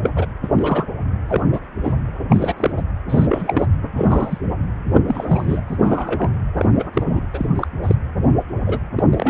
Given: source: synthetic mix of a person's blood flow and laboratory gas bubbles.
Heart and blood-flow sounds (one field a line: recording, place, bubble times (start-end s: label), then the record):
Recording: Doppler ultrasound of blood flow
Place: precordium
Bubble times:
0.03-0.09 s: bubbles
0.16-0.26 s: bubbles
0.44-0.48 s: bubbles
0.55-0.83 s: bubbles
1.28-1.43 s: bubbles
1.52-1.59 s: bubbles
1.83-1.93 s: bubbles
2.29-2.54 s: bubbles
2.57-2.71 s: bubbles
2.76-2.83 s: bubbles
3.09-3.67 s: bubbles
3.96-4.39 s: bubbles
4.89-5.02 s: bubbles
5.08-5.61 s: bubbles
5.67-6.29 s: bubbles
6.58-6.66 s: bubbles
6.75-6.87 s: bubbles
6.94-7.03 s: bubbles
7.12-7.22 s: bubbles
7.33-7.46 s: bubbles
7.56-7.67 s: bubbles
7.83-7.96 s: bubbles
8.66-8.79 s: bubbles
8.96-9.04 s: bubbles
9.11-9.30 s: bubbles
From the record:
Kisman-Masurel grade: 242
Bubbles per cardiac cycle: several, 3 to 8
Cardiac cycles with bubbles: 100%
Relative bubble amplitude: moderate (0.250 to 0.450)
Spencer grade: 3 (all of the cardiac periods contain showers or single bubble signals, but not dominating or overriding the cardiac motion signals)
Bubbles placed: anywhere in the cardiac cycle